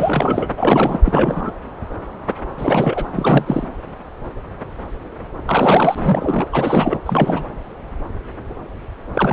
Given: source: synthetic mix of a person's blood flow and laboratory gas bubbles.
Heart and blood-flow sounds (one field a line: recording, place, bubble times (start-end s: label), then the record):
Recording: Doppler ultrasound of blood flow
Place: subclavian vein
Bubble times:
0.00-0.48 s: bubbles
0.57-1.01 s: bubbles
1.05-1.52 s: bubbles
2.58-3.08 s: bubbles
3.13-3.67 s: bubbles
5.42-6.47 s: bubbles
6.52-7.00 s: bubbles
7.05-7.47 s: bubbles
9.14-9.33 s: bubbles
From the record:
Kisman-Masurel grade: 333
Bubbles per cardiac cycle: rolling drumbeat, 9 or more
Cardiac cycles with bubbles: 50 to 99%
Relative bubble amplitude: loud (0.450 to 0.775)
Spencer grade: 3 (all of the cardiac periods contain showers or single bubble signals, but not dominating or overriding the cardiac motion signals)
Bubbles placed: anywhere in the cardiac cycle